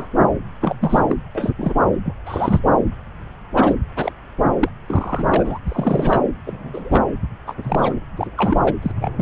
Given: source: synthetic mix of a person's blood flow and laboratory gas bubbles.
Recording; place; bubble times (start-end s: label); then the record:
Doppler ultrasound of blood flow; subclavian vein
0.00-0.06 s: bubbles
0.60-1.06 s: bubbles
1.09-1.16 s: bubbles
1.35-1.52 s: bubbles
1.58-1.73 s: bubbles
2.04-2.13 s: bubbles
2.25-2.59 s: bubbles
3.54-3.73 s: bubbles
3.97-4.12 s: bubbles
4.60-4.69 s: bubbles
4.87-5.58 s: bubbles
5.66-6.21 s: bubbles
6.47-7.02 s: bubbles
7.47-7.54 s: bubbles
7.62-7.93 s: bubbles
8.17-8.27 s: bubbles
8.37-8.58 s: bubbles
8.64-8.73 s: bubbles
8.82-8.91 s: bubbles
8.95-9.10 s: bubbles
9.16-9.22 s: bubbles
From the record:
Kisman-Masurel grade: 232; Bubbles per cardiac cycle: several, 3 to 8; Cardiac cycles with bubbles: 50 to 99%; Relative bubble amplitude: moderate (0.250 to 0.450); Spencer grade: 3 (all of the cardiac periods contain showers or single bubble signals, but not dominating or overriding the cardiac motion signals); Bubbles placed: anywhere in the cardiac cycle